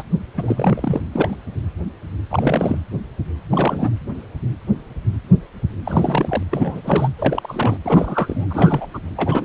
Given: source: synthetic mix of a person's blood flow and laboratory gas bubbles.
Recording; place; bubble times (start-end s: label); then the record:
Doppler ultrasound of blood flow; precordium
0.00-0.03 s: bubbles
0.37-1.01 s: bubbles
1.12-1.36 s: bubbles
2.31-2.81 s: bubbles
3.50-3.90 s: bubbles
5.85-6.43 s: bubbles
6.51-6.81 s: bubbles
6.84-7.08 s: bubbles
7.17-7.77 s: bubbles
7.85-8.46 s: bubbles
8.50-8.87 s: bubbles
8.94-8.98 s: bubbles
9.16-9.45 s: bubbles
From the record:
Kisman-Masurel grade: 332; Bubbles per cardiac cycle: rolling drumbeat, 9 or more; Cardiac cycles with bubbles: 50 to 99%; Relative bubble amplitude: moderate (0.250 to 0.450); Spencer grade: 3 (all of the cardiac periods contain showers or single bubble signals, but not dominating or overriding the cardiac motion signals); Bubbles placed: anywhere in the cardiac cycle